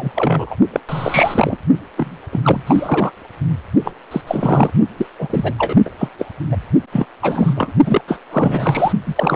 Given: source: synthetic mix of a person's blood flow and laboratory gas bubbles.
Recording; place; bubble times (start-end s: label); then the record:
Doppler ultrasound of blood flow; precordium
0.00-0.11 s: bubbles
0.15-0.56 s: bubbles
0.72-0.80 s: bubbles
0.88-1.57 s: bubbles
1.97-2.17 s: bubbles
2.32-2.62 s: bubbles
2.67-3.11 s: bubbles
3.84-3.92 s: bubbles
4.11-4.21 s: bubbles
4.27-4.70 s: bubbles
4.96-5.07 s: bubbles
5.19-5.53 s: bubbles
5.58-5.75 s: bubbles
5.85-5.90 s: bubbles
5.98-6.08 s: bubbles
6.19-6.25 s: bubbles
6.51-6.57 s: bubbles
6.92-7.05 s: bubbles
7.22-7.73 s: bubbles
7.86-8.01 s: bubbles
8.07-8.19 s: bubbles
8.31-8.92 s: bubbles
9.06-9.36 s: bubbles
From the record:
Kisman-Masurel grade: 343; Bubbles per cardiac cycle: rolling drumbeat, 9 or more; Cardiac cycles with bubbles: 100%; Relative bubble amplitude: loud (0.450 to 0.775); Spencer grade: 3 (all of the cardiac periods contain showers or single bubble signals, but not dominating or overriding the cardiac motion signals); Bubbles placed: only in the low amplitude regions of the cardiac cycle